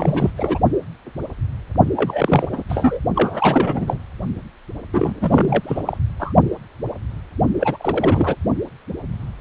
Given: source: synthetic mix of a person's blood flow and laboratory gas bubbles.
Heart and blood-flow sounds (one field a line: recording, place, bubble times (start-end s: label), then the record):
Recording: Doppler ultrasound of blood flow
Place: precordium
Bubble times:
0.00-0.30 s: bubbles
0.37-0.58 s: bubbles
1.96-2.47 s: bubbles
2.52-2.63 s: bubbles
2.69-3.00 s: bubbles
3.15-3.98 s: bubbles
4.93-5.83 s: bubbles
5.87-5.97 s: bubbles
6.20-6.33 s: bubbles
7.60-8.35 s: bubbles
From the record:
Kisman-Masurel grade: 332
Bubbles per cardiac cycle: rolling drumbeat, 9 or more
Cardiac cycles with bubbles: 50 to 99%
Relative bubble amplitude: moderate (0.250 to 0.450)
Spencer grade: 3 (all of the cardiac periods contain showers or single bubble signals, but not dominating or overriding the cardiac motion signals)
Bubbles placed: only in the low amplitude regions of the cardiac cycle